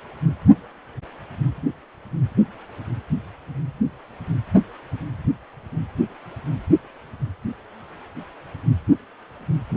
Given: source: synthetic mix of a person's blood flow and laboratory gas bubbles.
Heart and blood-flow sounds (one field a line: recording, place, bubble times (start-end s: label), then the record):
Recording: Doppler ultrasound of blood flow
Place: precordium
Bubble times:
no bubbles
From the record:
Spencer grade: 0 (complete lack of bubble signals)